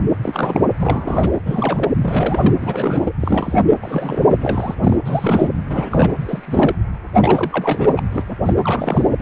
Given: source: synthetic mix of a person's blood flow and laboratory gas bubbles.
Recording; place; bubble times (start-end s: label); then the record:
Doppler ultrasound of blood flow; precordium
0.00-0.04 s: bubbles
0.22-0.60 s: bubbles
0.78-1.32 s: bubbles
1.45-1.92 s: bubbles
2.01-2.55 s: bubbles
2.61-3.12 s: bubbles
3.20-3.60 s: bubbles
3.81-4.38 s: bubbles
4.41-4.75 s: bubbles
4.80-5.00 s: bubbles
5.05-5.50 s: bubbles
5.69-6.12 s: bubbles
6.21-6.75 s: bubbles
7.21-7.94 s: bubbles
7.96-8.02 s: bubbles
8.12-8.23 s: bubbles
8.30-8.35 s: bubbles
8.45-8.54 s: bubbles
8.62-9.08 s: bubbles
9.20-9.22 s: bubbles
From the record:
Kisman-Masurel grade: 342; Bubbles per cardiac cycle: rolling drumbeat, 9 or more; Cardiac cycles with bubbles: 100%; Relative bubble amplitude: moderate (0.250 to 0.450); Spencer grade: 3 (all of the cardiac periods contain showers or single bubble signals, but not dominating or overriding the cardiac motion signals); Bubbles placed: anywhere in the cardiac cycle